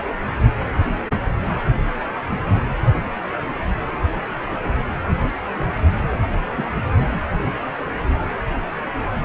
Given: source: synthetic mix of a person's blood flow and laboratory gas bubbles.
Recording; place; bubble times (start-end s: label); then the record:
Doppler ultrasound of blood flow; precordium
6.56-6.67 s: bubbles
From the record:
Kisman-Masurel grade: 112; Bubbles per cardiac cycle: 1 to 2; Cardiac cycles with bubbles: 1 to 10%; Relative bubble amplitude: moderate (0.250 to 0.450); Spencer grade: 1 (occasional bubble signal discernible with the cardiac motion signal, with majority of cardiac periods free of bubbles); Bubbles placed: anywhere in the cardiac cycle